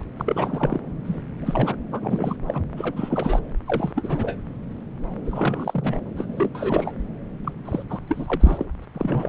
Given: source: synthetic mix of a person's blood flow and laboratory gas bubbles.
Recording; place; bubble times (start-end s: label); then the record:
Doppler ultrasound of blood flow; subclavian vein
0.00-0.03 s: bubbles
0.17-0.80 s: bubbles
1.04-1.22 s: bubbles
1.41-1.75 s: bubbles
1.91-2.36 s: bubbles
2.48-2.61 s: bubbles
2.76-3.39 s: bubbles
3.67-3.92 s: bubbles
3.96-4.38 s: bubbles
5.25-6.49 s: bubbles
6.54-6.92 s: bubbles
7.44-7.53 s: bubbles
7.65-7.83 s: bubbles
7.90-8.00 s: bubbles
8.08-8.65 s: bubbles
8.82-8.86 s: bubbles
8.94-9.29 s: bubbles
From the record:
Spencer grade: 3 (all of the cardiac periods contain showers or single bubble signals, but not dominating or overriding the cardiac motion signals); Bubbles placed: anywhere in the cardiac cycle